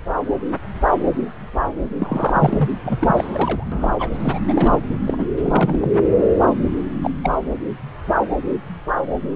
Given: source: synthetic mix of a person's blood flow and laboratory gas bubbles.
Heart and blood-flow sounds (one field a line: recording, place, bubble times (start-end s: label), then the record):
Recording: Doppler ultrasound of blood flow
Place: subclavian vein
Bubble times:
1.99-2.69 s: bubbles
2.85-3.65 s: bubbles
3.71-3.91 s: bubbles
3.98-4.40 s: bubbles
4.48-4.79 s: bubbles
5.04-5.25 s: bubbles
5.41-5.99 s: bubbles
7.02-7.11 s: bubbles
7.23-7.38 s: bubbles
From the record:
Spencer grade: 3 (all of the cardiac periods contain showers or single bubble signals, but not dominating or overriding the cardiac motion signals)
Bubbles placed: anywhere in the cardiac cycle